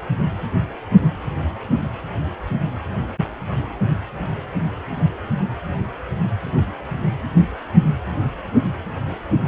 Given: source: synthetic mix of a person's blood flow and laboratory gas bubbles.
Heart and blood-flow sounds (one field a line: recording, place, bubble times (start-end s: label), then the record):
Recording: Doppler ultrasound of blood flow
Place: precordium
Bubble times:
0.18-0.28 s: bubbles
6.57-6.64 s: bubbles
From the record:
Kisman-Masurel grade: 111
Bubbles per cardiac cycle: 1 to 2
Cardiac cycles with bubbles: 1 to 10%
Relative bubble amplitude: barely perceptible (0.100 to 0.250)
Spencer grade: 1 (occasional bubble signal discernible with the cardiac motion signal, with majority of cardiac periods free of bubbles)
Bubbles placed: anywhere in the cardiac cycle